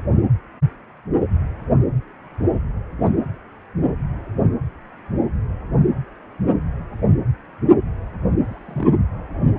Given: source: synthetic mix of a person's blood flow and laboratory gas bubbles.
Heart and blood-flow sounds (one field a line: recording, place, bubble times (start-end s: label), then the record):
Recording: Doppler ultrasound of blood flow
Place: precordium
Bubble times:
3.03-3.11 s: bubbles
8.46-8.87 s: bubbles
From the record:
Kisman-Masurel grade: 111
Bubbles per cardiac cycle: 1 to 2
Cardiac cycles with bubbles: 1 to 10%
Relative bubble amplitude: barely perceptible (0.100 to 0.250)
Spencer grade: 1 (occasional bubble signal discernible with the cardiac motion signal, with majority of cardiac periods free of bubbles)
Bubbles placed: anywhere in the cardiac cycle